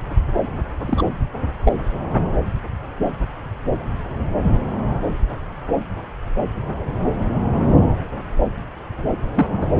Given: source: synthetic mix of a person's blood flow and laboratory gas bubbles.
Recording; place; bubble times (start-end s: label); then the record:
Doppler ultrasound of blood flow; subclavian vein
0.87-1.03 s: bubbles
1.64-1.73 s: bubbles
9.35-9.47 s: bubbles
9.61-9.66 s: bubbles
9.72-9.80 s: bubbles
From the record:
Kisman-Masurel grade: 222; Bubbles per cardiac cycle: several, 3 to 8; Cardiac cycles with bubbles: 10 to 50%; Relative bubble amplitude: moderate (0.250 to 0.450); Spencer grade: 2 (many but less than half of the cardiac periods contain bubble signals, singularly or in groups); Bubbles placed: anywhere in the cardiac cycle